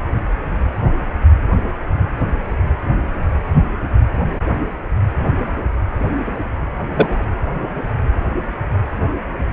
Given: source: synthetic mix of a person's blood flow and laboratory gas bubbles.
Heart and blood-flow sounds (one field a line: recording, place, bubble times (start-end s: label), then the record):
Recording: Doppler ultrasound of blood flow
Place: precordium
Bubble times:
6.96-7.31 s: bubbles
From the record:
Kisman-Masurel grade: 113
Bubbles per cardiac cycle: 1 to 2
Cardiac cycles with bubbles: 1 to 10%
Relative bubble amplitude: loud (0.450 to 0.775)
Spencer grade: 1 (occasional bubble signal discernible with the cardiac motion signal, with majority of cardiac periods free of bubbles)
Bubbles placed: anywhere in the cardiac cycle